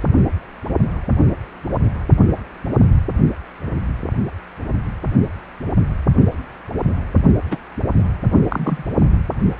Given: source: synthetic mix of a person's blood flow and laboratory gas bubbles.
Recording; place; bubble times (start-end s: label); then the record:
Doppler ultrasound of blood flow; precordium
7.50-7.58 s: bubbles
7.99-8.08 s: bubbles
8.50-8.83 s: bubbles
From the record:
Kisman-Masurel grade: 122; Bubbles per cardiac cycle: 1 to 2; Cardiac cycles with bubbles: 10 to 50%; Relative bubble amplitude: moderate (0.250 to 0.450); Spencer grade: 2 (many but less than half of the cardiac periods contain bubble signals, singularly or in groups); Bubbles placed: only in the low amplitude regions of the cardiac cycle